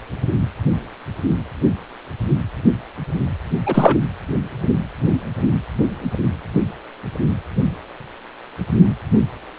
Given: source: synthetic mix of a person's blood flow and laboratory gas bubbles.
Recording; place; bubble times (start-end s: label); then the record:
Doppler ultrasound of blood flow; precordium
3.66-3.96 s: bubbles
From the record:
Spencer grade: 1 (occasional bubble signal discernible with the cardiac motion signal, with majority of cardiac periods free of bubbles); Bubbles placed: anywhere in the cardiac cycle